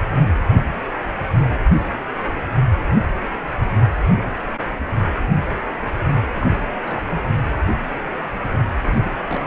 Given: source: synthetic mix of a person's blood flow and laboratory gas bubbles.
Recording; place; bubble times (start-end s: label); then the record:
Doppler ultrasound of blood flow; precordium
6.34-6.64 s: bubbles
6.81-7.06 s: bubbles
7.12-7.22 s: bubbles
8.82-9.00 s: bubbles
9.03-9.11 s: bubbles
9.26-9.47 s: bubbles
From the record:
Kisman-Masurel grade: 211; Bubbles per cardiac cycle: several, 3 to 8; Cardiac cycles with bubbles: 1 to 10%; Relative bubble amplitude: barely perceptible (0.100 to 0.250); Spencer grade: 1 (occasional bubble signal discernible with the cardiac motion signal, with majority of cardiac periods free of bubbles); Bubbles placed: anywhere in the cardiac cycle